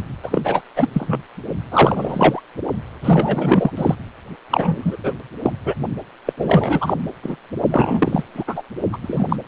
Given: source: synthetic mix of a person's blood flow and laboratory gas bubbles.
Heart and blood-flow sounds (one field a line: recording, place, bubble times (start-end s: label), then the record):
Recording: Doppler ultrasound of blood flow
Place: precordium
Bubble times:
0.23-0.61 s: bubbles
0.75-0.90 s: bubbles
0.93-1.22 s: bubbles
1.71-2.41 s: bubbles
3.04-3.71 s: bubbles
3.77-3.95 s: bubbles
4.49-4.96 s: bubbles
5.03-5.13 s: bubbles
5.43-5.51 s: bubbles
5.65-5.75 s: bubbles
6.25-6.33 s: bubbles
6.37-6.94 s: bubbles
7.22-7.36 s: bubbles
7.68-8.24 s: bubbles
8.34-8.44 s: bubbles
8.47-8.62 s: bubbles
8.92-8.97 s: bubbles
9.02-9.26 s: bubbles
9.29-9.37 s: bubbles
From the record:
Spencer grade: 3 (all of the cardiac periods contain showers or single bubble signals, but not dominating or overriding the cardiac motion signals)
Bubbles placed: only in the low amplitude regions of the cardiac cycle